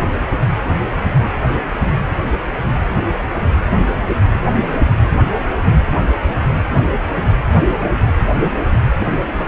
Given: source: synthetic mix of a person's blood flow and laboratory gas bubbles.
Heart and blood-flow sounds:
Doppler ultrasound of blood flow; precordium
2.88-3.06 s: bubbles
From the record:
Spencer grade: 1 (occasional bubble signal discernible with the cardiac motion signal, with majority of cardiac periods free of bubbles); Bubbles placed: anywhere in the cardiac cycle

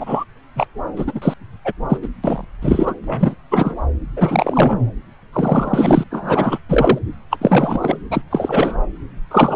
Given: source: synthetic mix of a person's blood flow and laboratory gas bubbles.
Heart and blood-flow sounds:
Doppler ultrasound of blood flow; subclavian vein
0.00-0.24 s: bubbles
0.56-0.67 s: bubbles
0.96-1.34 s: bubbles
1.65-1.73 s: bubbles
1.89-1.98 s: bubbles
2.02-2.07 s: bubbles
2.23-2.44 s: bubbles
2.61-2.94 s: bubbles
3.07-3.34 s: bubbles
3.50-3.75 s: bubbles
4.16-4.77 s: bubbles
5.33-6.04 s: bubbles
6.10-6.58 s: bubbles
6.69-6.99 s: bubbles
7.31-7.38 s: bubbles
7.41-7.97 s: bubbles
8.11-8.21 s: bubbles
8.30-8.78 s: bubbles
9.31-9.56 s: bubbles
From the record:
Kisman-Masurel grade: 343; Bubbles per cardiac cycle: rolling drumbeat, 9 or more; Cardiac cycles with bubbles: 100%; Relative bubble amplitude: loud (0.450 to 0.775); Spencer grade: 3 (all of the cardiac periods contain showers or single bubble signals, but not dominating or overriding the cardiac motion signals); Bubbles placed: anywhere in the cardiac cycle

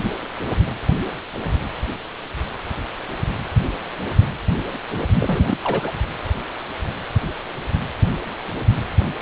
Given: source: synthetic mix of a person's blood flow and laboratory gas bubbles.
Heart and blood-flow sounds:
Doppler ultrasound of blood flow; precordium
5.13-5.57 s: bubbles
5.64-5.92 s: bubbles
From the record:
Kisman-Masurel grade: 212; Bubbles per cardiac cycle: several, 3 to 8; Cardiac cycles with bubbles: 1 to 10%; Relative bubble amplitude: moderate (0.250 to 0.450); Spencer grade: 1 (occasional bubble signal discernible with the cardiac motion signal, with majority of cardiac periods free of bubbles); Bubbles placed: anywhere in the cardiac cycle

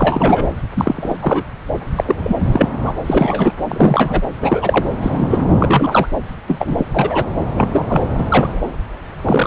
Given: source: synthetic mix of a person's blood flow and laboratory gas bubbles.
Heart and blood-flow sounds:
Doppler ultrasound of blood flow; subclavian vein
0.00-0.48 s: bubbles
0.75-1.16 s: bubbles
1.20-1.43 s: bubbles
1.95-2.15 s: bubbles
2.24-2.36 s: bubbles
2.52-2.70 s: bubbles
2.83-2.94 s: bubbles
3.07-3.53 s: bubbles
3.68-4.22 s: bubbles
4.42-4.88 s: bubbles
5.02-5.40 s: bubbles
5.59-6.08 s: bubbles
6.47-6.75 s: bubbles
6.78-6.86 s: bubbles
6.92-7.24 s: bubbles
7.54-7.86 s: bubbles
7.88-8.00 s: bubbles
8.18-8.25 s: bubbles
8.29-8.49 s: bubbles
9.25-9.47 s: bubbles
From the record:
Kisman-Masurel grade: 233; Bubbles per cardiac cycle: several, 3 to 8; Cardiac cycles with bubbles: 50 to 99%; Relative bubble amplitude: loud (0.450 to 0.775); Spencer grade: 3 (all of the cardiac periods contain showers or single bubble signals, but not dominating or overriding the cardiac motion signals); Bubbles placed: anywhere in the cardiac cycle

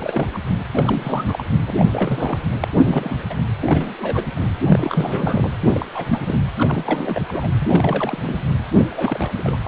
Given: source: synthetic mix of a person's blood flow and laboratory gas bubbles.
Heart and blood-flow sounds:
Doppler ultrasound of blood flow; precordium
0.00-0.28 s: bubbles
0.33-0.40 s: bubbles
0.73-1.44 s: bubbles
1.67-1.74 s: bubbles
1.77-1.85 s: bubbles
1.93-2.39 s: bubbles
2.60-2.68 s: bubbles
2.72-3.25 s: bubbles
3.29-3.39 s: bubbles
3.60-3.94 s: bubbles
3.98-4.26 s: bubbles
4.35-4.54 s: bubbles
4.69-5.51 s: bubbles
5.61-5.85 s: bubbles
5.94-6.05 s: bubbles
6.08-6.39 s: bubbles
6.58-7.21 s: bubbles
7.27-7.47 s: bubbles
7.58-8.38 s: bubbles
8.79-8.85 s: bubbles
8.90-9.57 s: bubbles
9.66-9.68 s: bubbles
From the record:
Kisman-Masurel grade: 342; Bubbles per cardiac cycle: rolling drumbeat, 9 or more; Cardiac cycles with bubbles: 100%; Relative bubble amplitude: moderate (0.250 to 0.450); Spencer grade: 3 (all of the cardiac periods contain showers or single bubble signals, but not dominating or overriding the cardiac motion signals); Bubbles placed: anywhere in the cardiac cycle

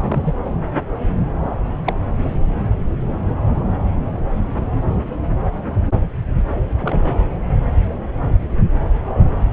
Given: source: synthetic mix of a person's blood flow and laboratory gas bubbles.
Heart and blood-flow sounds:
Doppler ultrasound of blood flow; subclavian vein
0.00-0.34 s: bubbles
1.84-1.93 s: bubbles
2.24-2.28 s: bubbles
6.79-7.19 s: bubbles
From the record:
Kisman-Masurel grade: 122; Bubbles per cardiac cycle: 1 to 2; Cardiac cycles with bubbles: 10 to 50%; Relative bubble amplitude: moderate (0.250 to 0.450); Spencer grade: 2 (many but less than half of the cardiac periods contain bubble signals, singularly or in groups); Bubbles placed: anywhere in the cardiac cycle

